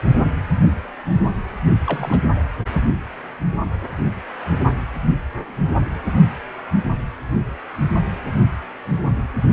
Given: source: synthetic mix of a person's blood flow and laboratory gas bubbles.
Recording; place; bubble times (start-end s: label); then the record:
Doppler ultrasound of blood flow; precordium
1.86-2.19 s: bubbles
From the record:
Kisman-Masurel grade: 211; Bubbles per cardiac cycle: several, 3 to 8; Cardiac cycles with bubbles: 1 to 10%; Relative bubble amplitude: barely perceptible (0.100 to 0.250); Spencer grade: 1 (occasional bubble signal discernible with the cardiac motion signal, with majority of cardiac periods free of bubbles); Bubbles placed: only in the low amplitude regions of the cardiac cycle